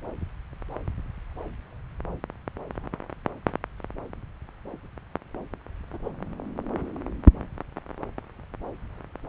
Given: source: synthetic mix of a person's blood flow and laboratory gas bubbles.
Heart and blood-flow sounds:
Doppler ultrasound of blood flow; subclavian vein
5.93-5.98 s: bubbles
6.04-6.12 s: bubbles
From the record:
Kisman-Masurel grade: 111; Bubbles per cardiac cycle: 1 to 2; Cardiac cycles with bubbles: 1 to 10%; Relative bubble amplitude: barely perceptible (0.100 to 0.250); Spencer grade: 1 (occasional bubble signal discernible with the cardiac motion signal, with majority of cardiac periods free of bubbles); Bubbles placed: anywhere in the cardiac cycle

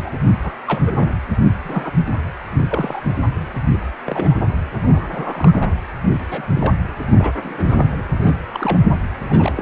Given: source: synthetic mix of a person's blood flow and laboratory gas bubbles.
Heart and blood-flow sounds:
Doppler ultrasound of blood flow; precordium
0.04-0.11 s: bubbles
0.44-0.52 s: bubbles
0.66-1.11 s: bubbles
1.64-1.92 s: bubbles
2.67-3.02 s: bubbles
4.04-4.39 s: bubbles
4.83-5.71 s: bubbles
6.30-6.43 s: bubbles
6.49-6.73 s: bubbles
7.11-7.32 s: bubbles
7.43-8.03 s: bubbles
8.16-8.33 s: bubbles
8.54-8.78 s: bubbles
9.20-9.62 s: bubbles
From the record:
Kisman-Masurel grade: 242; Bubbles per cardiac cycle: several, 3 to 8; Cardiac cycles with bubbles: 100%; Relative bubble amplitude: moderate (0.250 to 0.450); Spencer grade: 3 (all of the cardiac periods contain showers or single bubble signals, but not dominating or overriding the cardiac motion signals); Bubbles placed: anywhere in the cardiac cycle

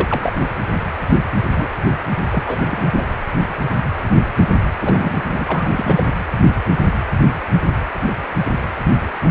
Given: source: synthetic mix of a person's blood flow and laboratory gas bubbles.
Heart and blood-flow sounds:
Doppler ultrasound of blood flow; precordium
0.00-0.32 s: bubbles
1.56-1.73 s: bubbles
2.31-2.41 s: bubbles
2.46-3.13 s: bubbles
4.81-5.22 s: bubbles
5.26-5.68 s: bubbles
5.73-6.12 s: bubbles
From the record:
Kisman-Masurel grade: 222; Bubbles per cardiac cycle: several, 3 to 8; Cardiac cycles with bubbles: 10 to 50%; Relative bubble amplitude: moderate (0.250 to 0.450); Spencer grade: 2 (many but less than half of the cardiac periods contain bubble signals, singularly or in groups); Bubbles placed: anywhere in the cardiac cycle

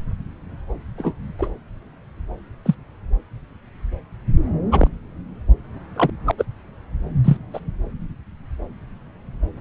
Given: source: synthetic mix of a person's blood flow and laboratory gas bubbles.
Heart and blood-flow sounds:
Doppler ultrasound of blood flow; subclavian vein
0.98-1.14 s: bubbles
1.39-1.50 s: bubbles
2.66-2.75 s: bubbles
4.71-4.88 s: bubbles
5.96-6.10 s: bubbles
6.26-6.32 s: bubbles
6.38-6.45 s: bubbles
7.24-7.37 s: bubbles
7.54-7.59 s: bubbles
From the record:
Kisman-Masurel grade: 123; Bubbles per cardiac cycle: 1 to 2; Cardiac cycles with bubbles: 10 to 50%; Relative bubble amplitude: loud (0.450 to 0.775); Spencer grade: 2 (many but less than half of the cardiac periods contain bubble signals, singularly or in groups); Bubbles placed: anywhere in the cardiac cycle

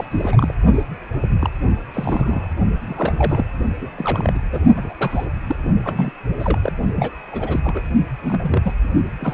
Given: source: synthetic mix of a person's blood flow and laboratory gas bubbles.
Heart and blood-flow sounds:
Doppler ultrasound of blood flow; precordium
0.00-0.05 s: bubbles
0.10-0.54 s: bubbles
0.73-0.83 s: bubbles
1.21-1.28 s: bubbles
1.40-1.50 s: bubbles
1.94-2.48 s: bubbles
2.81-3.46 s: bubbles
3.81-3.88 s: bubbles
3.98-4.40 s: bubbles
4.51-4.61 s: bubbles
4.75-4.93 s: bubbles
4.98-5.30 s: bubbles
5.47-5.56 s: bubbles
5.85-6.11 s: bubbles
6.40-6.59 s: bubbles
6.62-6.73 s: bubbles
6.96-7.10 s: bubbles
7.31-7.60 s: bubbles
7.62-7.83 s: bubbles
8.22-8.72 s: bubbles
9.20-9.34 s: bubbles
From the record:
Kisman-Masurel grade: 242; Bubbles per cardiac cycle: several, 3 to 8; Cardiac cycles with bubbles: 100%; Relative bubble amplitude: moderate (0.250 to 0.450); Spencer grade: 3 (all of the cardiac periods contain showers or single bubble signals, but not dominating or overriding the cardiac motion signals); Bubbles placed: only in the low amplitude regions of the cardiac cycle

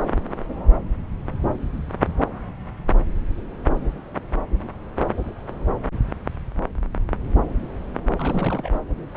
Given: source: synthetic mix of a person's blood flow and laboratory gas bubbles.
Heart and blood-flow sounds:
Doppler ultrasound of blood flow; subclavian vein
8.17-8.70 s: bubbles
From the record:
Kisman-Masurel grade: 221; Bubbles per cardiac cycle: several, 3 to 8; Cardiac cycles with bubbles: 10 to 50%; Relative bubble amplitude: barely perceptible (0.100 to 0.250); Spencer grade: 2 (many but less than half of the cardiac periods contain bubble signals, singularly or in groups); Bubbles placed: anywhere in the cardiac cycle

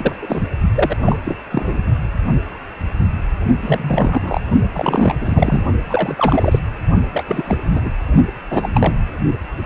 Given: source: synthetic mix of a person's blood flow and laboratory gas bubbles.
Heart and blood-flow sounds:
Doppler ultrasound of blood flow; precordium
0.00-0.16 s: bubbles
0.21-0.42 s: bubbles
0.75-0.96 s: bubbles
1.04-1.18 s: bubbles
1.24-1.36 s: bubbles
1.52-1.80 s: bubbles
3.61-4.41 s: bubbles
4.74-5.15 s: bubbles
5.20-5.63 s: bubbles
5.84-6.59 s: bubbles
7.11-7.82 s: bubbles
7.85-7.90 s: bubbles
8.50-8.69 s: bubbles
8.74-8.98 s: bubbles
From the record:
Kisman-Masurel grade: 332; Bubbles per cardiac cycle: rolling drumbeat, 9 or more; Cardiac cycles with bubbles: 50 to 99%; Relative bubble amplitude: moderate (0.250 to 0.450); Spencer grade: 3 (all of the cardiac periods contain showers or single bubble signals, but not dominating or overriding the cardiac motion signals); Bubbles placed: only in the low amplitude regions of the cardiac cycle

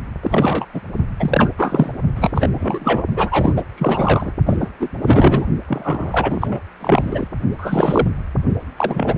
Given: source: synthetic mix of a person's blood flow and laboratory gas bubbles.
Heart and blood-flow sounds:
Doppler ultrasound of blood flow; precordium
0.22-0.66 s: bubbles
0.74-0.81 s: bubbles
1.19-1.51 s: bubbles
1.58-1.92 s: bubbles
2.15-2.31 s: bubbles
2.35-2.48 s: bubbles
2.54-3.04 s: bubbles
3.16-3.53 s: bubbles
3.56-3.63 s: bubbles
3.77-4.32 s: bubbles
4.46-4.56 s: bubbles
4.59-4.71 s: bubbles
4.79-4.89 s: bubbles
5.03-5.47 s: bubbles
5.68-6.62 s: bubbles
6.79-7.28 s: bubbles
7.58-8.08 s: bubbles
8.76-9.17 s: bubbles
From the record:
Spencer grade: 3 (all of the cardiac periods contain showers or single bubble signals, but not dominating or overriding the cardiac motion signals); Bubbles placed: only in the low amplitude regions of the cardiac cycle

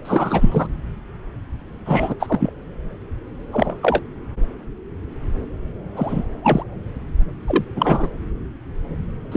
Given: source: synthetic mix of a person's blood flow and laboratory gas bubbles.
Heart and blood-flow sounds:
Doppler ultrasound of blood flow; subclavian vein
0.05-0.67 s: bubbles
1.85-2.14 s: bubbles
2.20-2.53 s: bubbles
3.52-3.76 s: bubbles
3.82-4.01 s: bubbles
5.96-6.22 s: bubbles
6.42-6.63 s: bubbles
7.46-7.65 s: bubbles
7.76-8.09 s: bubbles
9.31-9.37 s: bubbles
From the record:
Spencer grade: 3 (all of the cardiac periods contain showers or single bubble signals, but not dominating or overriding the cardiac motion signals); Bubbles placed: anywhere in the cardiac cycle

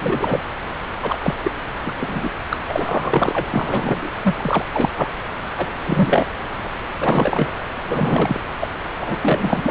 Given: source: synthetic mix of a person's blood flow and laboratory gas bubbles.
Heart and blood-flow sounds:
Doppler ultrasound of blood flow; subclavian vein
0.00-0.49 s: bubbles
1.03-1.34 s: bubbles
1.43-1.51 s: bubbles
1.86-1.93 s: bubbles
1.98-2.29 s: bubbles
2.50-2.56 s: bubbles
2.69-4.10 s: bubbles
4.24-4.66 s: bubbles
4.74-4.89 s: bubbles
4.96-5.10 s: bubbles
5.56-5.75 s: bubbles
5.83-6.25 s: bubbles
6.56-6.67 s: bubbles
6.99-7.55 s: bubbles
7.88-8.40 s: bubbles
8.59-8.68 s: bubbles
9.01-9.18 s: bubbles
9.21-9.71 s: bubbles
From the record:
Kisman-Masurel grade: 343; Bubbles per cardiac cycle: rolling drumbeat, 9 or more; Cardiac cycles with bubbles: 100%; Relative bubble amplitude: loud (0.450 to 0.775); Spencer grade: 3 (all of the cardiac periods contain showers or single bubble signals, but not dominating or overriding the cardiac motion signals); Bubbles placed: anywhere in the cardiac cycle

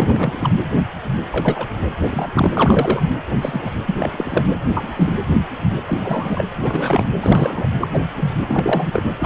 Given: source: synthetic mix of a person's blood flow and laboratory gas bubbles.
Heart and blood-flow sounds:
Doppler ultrasound of blood flow; precordium
0.00-0.51 s: bubbles
1.32-1.68 s: bubbles
2.00-2.29 s: bubbles
2.33-2.50 s: bubbles
2.54-3.00 s: bubbles
3.29-3.71 s: bubbles
3.86-3.94 s: bubbles
4.00-4.46 s: bubbles
4.71-4.90 s: bubbles
4.96-5.12 s: bubbles
5.87-6.44 s: bubbles
6.54-7.07 s: bubbles
7.21-7.68 s: bubbles
7.81-8.05 s: bubbles
8.17-8.32 s: bubbles
8.49-9.04 s: bubbles
9.19-9.26 s: bubbles
From the record:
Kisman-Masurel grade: 233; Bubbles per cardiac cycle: several, 3 to 8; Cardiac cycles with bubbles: 50 to 99%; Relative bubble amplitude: loud (0.450 to 0.775); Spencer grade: 3 (all of the cardiac periods contain showers or single bubble signals, but not dominating or overriding the cardiac motion signals); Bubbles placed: anywhere in the cardiac cycle

